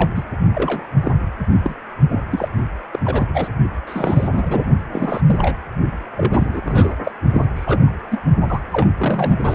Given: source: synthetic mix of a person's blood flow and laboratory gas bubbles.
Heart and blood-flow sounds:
Doppler ultrasound of blood flow; precordium
0.00-0.12 s: bubbles
0.15-0.23 s: bubbles
0.55-0.87 s: bubbles
1.02-1.12 s: bubbles
1.63-1.75 s: bubbles
2.09-2.21 s: bubbles
2.31-2.48 s: bubbles
2.92-2.99 s: bubbles
3.04-3.26 s: bubbles
3.34-3.48 s: bubbles
3.87-4.29 s: bubbles
4.31-4.64 s: bubbles
4.92-5.21 s: bubbles
5.25-5.55 s: bubbles
6.17-6.62 s: bubbles
6.66-6.94 s: bubbles
7.04-7.12 s: bubbles
7.33-7.46 s: bubbles
7.55-7.93 s: bubbles
8.11-8.20 s: bubbles
8.48-8.60 s: bubbles
8.73-8.89 s: bubbles
8.97-9.55 s: bubbles
From the record:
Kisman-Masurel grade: 242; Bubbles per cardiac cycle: several, 3 to 8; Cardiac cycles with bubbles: 100%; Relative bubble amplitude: moderate (0.250 to 0.450); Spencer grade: 3 (all of the cardiac periods contain showers or single bubble signals, but not dominating or overriding the cardiac motion signals); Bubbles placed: only in the low amplitude regions of the cardiac cycle

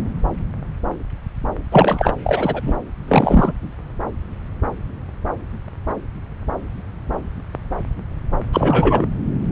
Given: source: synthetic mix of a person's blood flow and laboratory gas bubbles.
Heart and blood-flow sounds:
Doppler ultrasound of blood flow; subclavian vein
1.71-2.13 s: bubbles
2.24-2.75 s: bubbles
3.07-3.52 s: bubbles
8.53-9.08 s: bubbles
From the record:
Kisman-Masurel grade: 223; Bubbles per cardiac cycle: several, 3 to 8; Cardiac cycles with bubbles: 10 to 50%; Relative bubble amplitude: loud (0.450 to 0.775); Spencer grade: 2 (many but less than half of the cardiac periods contain bubble signals, singularly or in groups); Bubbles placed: anywhere in the cardiac cycle

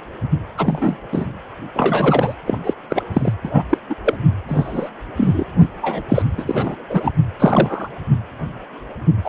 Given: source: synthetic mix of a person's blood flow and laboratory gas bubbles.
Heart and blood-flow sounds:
Doppler ultrasound of blood flow; precordium
0.57-0.99 s: bubbles
1.12-1.26 s: bubbles
1.74-2.34 s: bubbles
2.45-2.58 s: bubbles
2.63-2.74 s: bubbles
2.90-3.03 s: bubbles
3.13-3.33 s: bubbles
3.44-3.63 s: bubbles
3.70-3.78 s: bubbles
3.89-3.95 s: bubbles
4.05-4.17 s: bubbles
4.48-4.89 s: bubbles
5.17-5.44 s: bubbles
5.60-5.68 s: bubbles
5.81-6.03 s: bubbles
6.08-6.22 s: bubbles
6.38-6.75 s: bubbles
6.90-7.12 s: bubbles
7.39-7.88 s: bubbles
9.24-9.29 s: bubbles
From the record:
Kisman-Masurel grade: 233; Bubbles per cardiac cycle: several, 3 to 8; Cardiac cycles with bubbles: 50 to 99%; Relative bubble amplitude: loud (0.450 to 0.775); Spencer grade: 3 (all of the cardiac periods contain showers or single bubble signals, but not dominating or overriding the cardiac motion signals); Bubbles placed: anywhere in the cardiac cycle

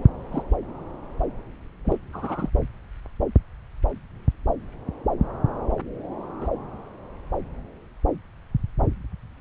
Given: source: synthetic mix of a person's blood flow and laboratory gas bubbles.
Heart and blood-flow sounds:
Doppler ultrasound of blood flow; subclavian vein
0.32-0.44 s: bubbles
1.84-1.96 s: bubbles
2.13-2.50 s: bubbles
6.40-6.50 s: bubbles
From the record:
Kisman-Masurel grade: 121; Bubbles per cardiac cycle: 1 to 2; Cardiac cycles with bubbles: 10 to 50%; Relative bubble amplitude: barely perceptible (0.100 to 0.250); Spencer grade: 2 (many but less than half of the cardiac periods contain bubble signals, singularly or in groups); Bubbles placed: anywhere in the cardiac cycle

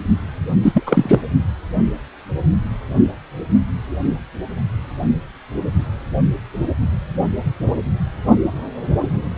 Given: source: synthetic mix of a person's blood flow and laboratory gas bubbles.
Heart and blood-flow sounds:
Doppler ultrasound of blood flow; precordium
0.62-0.83 s: bubbles
0.86-1.21 s: bubbles
From the record:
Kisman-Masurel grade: 213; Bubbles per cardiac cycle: several, 3 to 8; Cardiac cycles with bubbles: 1 to 10%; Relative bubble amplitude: loud (0.450 to 0.775); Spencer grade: 1 (occasional bubble signal discernible with the cardiac motion signal, with majority of cardiac periods free of bubbles); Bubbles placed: only in the low amplitude regions of the cardiac cycle

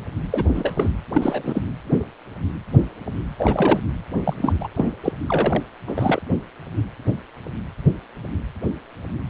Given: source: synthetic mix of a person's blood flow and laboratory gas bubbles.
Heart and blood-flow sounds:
Doppler ultrasound of blood flow; precordium
0.31-0.43 s: bubbles
0.54-0.74 s: bubbles
0.77-0.89 s: bubbles
1.14-1.61 s: bubbles
3.38-3.80 s: bubbles
4.24-4.33 s: bubbles
4.38-4.53 s: bubbles
4.60-4.68 s: bubbles
4.75-4.93 s: bubbles
5.03-5.12 s: bubbles
5.28-5.63 s: bubbles
5.87-6.21 s: bubbles
From the record:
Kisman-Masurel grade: 222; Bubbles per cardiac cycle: several, 3 to 8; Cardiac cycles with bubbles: 10 to 50%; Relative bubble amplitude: moderate (0.250 to 0.450); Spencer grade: 2 (many but less than half of the cardiac periods contain bubble signals, singularly or in groups); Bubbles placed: anywhere in the cardiac cycle

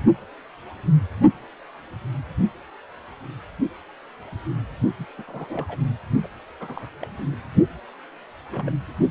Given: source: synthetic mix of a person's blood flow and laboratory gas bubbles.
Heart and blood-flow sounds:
Doppler ultrasound of blood flow; precordium
4.99-5.05 s: bubbles
5.18-5.24 s: bubbles
5.27-5.78 s: bubbles
6.23-6.27 s: bubbles
6.60-6.90 s: bubbles
7.02-7.08 s: bubbles
7.32-7.36 s: bubbles
8.50-8.71 s: bubbles
From the record:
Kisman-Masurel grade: 221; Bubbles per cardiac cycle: several, 3 to 8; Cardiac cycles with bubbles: 10 to 50%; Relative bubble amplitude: barely perceptible (0.100 to 0.250); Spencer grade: 2 (many but less than half of the cardiac periods contain bubble signals, singularly or in groups); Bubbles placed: only in the low amplitude regions of the cardiac cycle

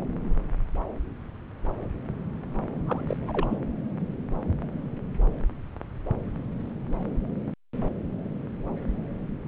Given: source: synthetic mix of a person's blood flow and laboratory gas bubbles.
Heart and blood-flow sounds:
Doppler ultrasound of blood flow; subclavian vein
2.86-3.17 s: bubbles
3.22-3.58 s: bubbles
From the record:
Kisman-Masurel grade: 211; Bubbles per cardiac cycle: several, 3 to 8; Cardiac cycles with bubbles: 1 to 10%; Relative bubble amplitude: barely perceptible (0.100 to 0.250); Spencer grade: 1 (occasional bubble signal discernible with the cardiac motion signal, with majority of cardiac periods free of bubbles); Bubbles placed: anywhere in the cardiac cycle

